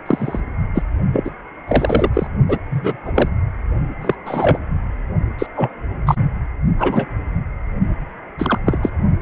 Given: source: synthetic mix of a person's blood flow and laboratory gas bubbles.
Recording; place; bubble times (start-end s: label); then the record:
Doppler ultrasound of blood flow; precordium
0.06-0.40 s: bubbles
0.75-0.82 s: bubbles
1.13-1.30 s: bubbles
1.68-2.09 s: bubbles
2.13-2.27 s: bubbles
2.49-2.58 s: bubbles
2.70-2.96 s: bubbles
3.05-3.12 s: bubbles
3.15-3.29 s: bubbles
4.01-4.15 s: bubbles
4.26-4.58 s: bubbles
5.38-5.46 s: bubbles
5.56-5.70 s: bubbles
6.06-6.15 s: bubbles
6.79-7.06 s: bubbles
8.38-8.58 s: bubbles
8.65-8.79 s: bubbles
8.82-8.89 s: bubbles
From the record:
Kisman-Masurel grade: 243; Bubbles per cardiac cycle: several, 3 to 8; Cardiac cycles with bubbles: 100%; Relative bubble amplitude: loud (0.450 to 0.775); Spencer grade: 3 (all of the cardiac periods contain showers or single bubble signals, but not dominating or overriding the cardiac motion signals); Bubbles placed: only in the low amplitude regions of the cardiac cycle